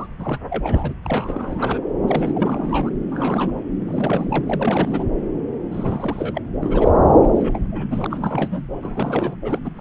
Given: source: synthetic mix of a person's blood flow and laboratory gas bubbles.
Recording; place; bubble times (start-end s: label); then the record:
Doppler ultrasound of blood flow; subclavian vein
0.00-0.07 s: bubbles
0.18-0.39 s: bubbles
0.44-0.94 s: bubbles
1.04-1.80 s: bubbles
2.06-2.90 s: bubbles
3.12-3.52 s: bubbles
3.79-5.04 s: bubbles
5.71-6.42 s: bubbles
6.62-6.92 s: bubbles
7.22-7.67 s: bubbles
7.72-7.86 s: bubbles
7.90-8.06 s: bubbles
8.10-8.62 s: bubbles
8.81-9.36 s: bubbles
9.42-9.59 s: bubbles
9.64-9.70 s: bubbles
9.77-9.81 s: bubbles
From the record:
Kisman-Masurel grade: 342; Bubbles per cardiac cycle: rolling drumbeat, 9 or more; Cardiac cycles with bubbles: 100%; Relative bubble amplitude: moderate (0.250 to 0.450); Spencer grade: 3 (all of the cardiac periods contain showers or single bubble signals, but not dominating or overriding the cardiac motion signals); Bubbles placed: anywhere in the cardiac cycle